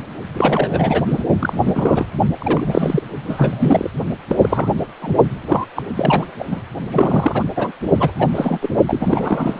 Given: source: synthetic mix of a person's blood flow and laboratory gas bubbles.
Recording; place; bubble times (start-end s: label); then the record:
Doppler ultrasound of blood flow; precordium
0.34-1.23 s: bubbles
1.39-2.06 s: bubbles
2.39-3.02 s: bubbles
3.25-3.90 s: bubbles
4.29-4.70 s: bubbles
5.01-5.16 s: bubbles
5.47-5.66 s: bubbles
5.75-5.83 s: bubbles
5.93-6.29 s: bubbles
6.39-6.44 s: bubbles
6.50-6.64 s: bubbles
6.88-7.43 s: bubbles
7.56-7.71 s: bubbles
7.98-8.11 s: bubbles
8.19-8.30 s: bubbles
8.35-8.59 s: bubbles
8.62-8.70 s: bubbles
8.87-9.60 s: bubbles
From the record:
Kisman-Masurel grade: 342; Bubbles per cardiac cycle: rolling drumbeat, 9 or more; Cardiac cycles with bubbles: 100%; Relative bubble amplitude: moderate (0.250 to 0.450); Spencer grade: 3 (all of the cardiac periods contain showers or single bubble signals, but not dominating or overriding the cardiac motion signals); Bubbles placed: only in the low amplitude regions of the cardiac cycle